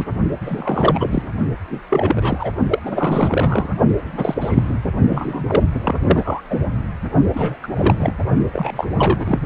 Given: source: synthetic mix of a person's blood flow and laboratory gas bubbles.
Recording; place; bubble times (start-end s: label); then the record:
Doppler ultrasound of blood flow; precordium
0.00-0.05 s: bubbles
0.41-1.28 s: bubbles
1.69-1.80 s: bubbles
1.90-2.50 s: bubbles
2.70-2.79 s: bubbles
2.85-3.75 s: bubbles
3.96-4.81 s: bubbles
5.11-5.65 s: bubbles
5.73-6.41 s: bubbles
6.50-6.62 s: bubbles
7.33-7.58 s: bubbles
7.62-7.67 s: bubbles
7.72-8.14 s: bubbles
8.53-8.88 s: bubbles
8.97-9.40 s: bubbles
From the record:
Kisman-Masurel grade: 343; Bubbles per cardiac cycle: rolling drumbeat, 9 or more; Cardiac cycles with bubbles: 100%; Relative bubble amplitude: loud (0.450 to 0.775); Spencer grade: 3 (all of the cardiac periods contain showers or single bubble signals, but not dominating or overriding the cardiac motion signals); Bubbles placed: only in the low amplitude regions of the cardiac cycle